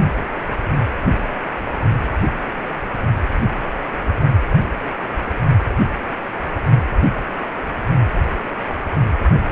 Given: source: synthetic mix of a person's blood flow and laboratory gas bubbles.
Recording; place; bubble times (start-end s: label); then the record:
Doppler ultrasound of blood flow; precordium
no bubbles
From the record:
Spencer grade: 0 (complete lack of bubble signals)